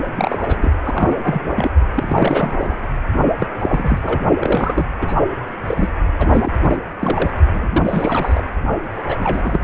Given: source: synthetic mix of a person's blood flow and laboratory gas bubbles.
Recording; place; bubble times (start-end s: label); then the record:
Doppler ultrasound of blood flow; precordium
0.15-0.74 s: bubbles
0.83-1.74 s: bubbles
1.95-2.78 s: bubbles
3.39-3.47 s: bubbles
3.60-4.21 s: bubbles
4.40-4.84 s: bubbles
5.01-5.14 s: bubbles
5.67-5.89 s: bubbles
6.18-6.52 s: bubbles
6.63-6.79 s: bubbles
6.99-7.31 s: bubbles
7.53-8.43 s: bubbles
8.96-9.02 s: bubbles
9.07-9.16 s: bubbles
9.19-9.60 s: bubbles
From the record:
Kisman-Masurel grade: 342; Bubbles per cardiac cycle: rolling drumbeat, 9 or more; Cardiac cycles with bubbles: 100%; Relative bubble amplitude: moderate (0.250 to 0.450); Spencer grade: 3 (all of the cardiac periods contain showers or single bubble signals, but not dominating or overriding the cardiac motion signals); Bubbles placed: only in the low amplitude regions of the cardiac cycle